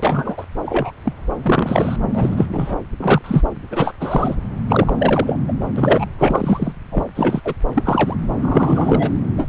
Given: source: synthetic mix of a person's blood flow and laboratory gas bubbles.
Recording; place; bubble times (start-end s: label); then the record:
Doppler ultrasound of blood flow; subclavian vein
0.00-0.45 s: bubbles
0.66-0.91 s: bubbles
1.03-1.14 s: bubbles
1.43-1.96 s: bubbles
2.13-2.46 s: bubbles
2.49-2.75 s: bubbles
2.98-3.42 s: bubbles
3.70-3.92 s: bubbles
4.00-4.35 s: bubbles
4.68-4.95 s: bubbles
4.98-5.39 s: bubbles
5.47-5.52 s: bubbles
5.76-6.05 s: bubbles
6.18-6.72 s: bubbles
6.91-7.04 s: bubbles
7.15-7.40 s: bubbles
7.44-7.53 s: bubbles
7.75-8.14 s: bubbles
8.39-9.11 s: bubbles
9.36-9.49 s: bubbles
From the record:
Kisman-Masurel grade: 243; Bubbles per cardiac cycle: several, 3 to 8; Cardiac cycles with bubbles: 100%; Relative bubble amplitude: loud (0.450 to 0.775); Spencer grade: 3 (all of the cardiac periods contain showers or single bubble signals, but not dominating or overriding the cardiac motion signals); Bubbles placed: anywhere in the cardiac cycle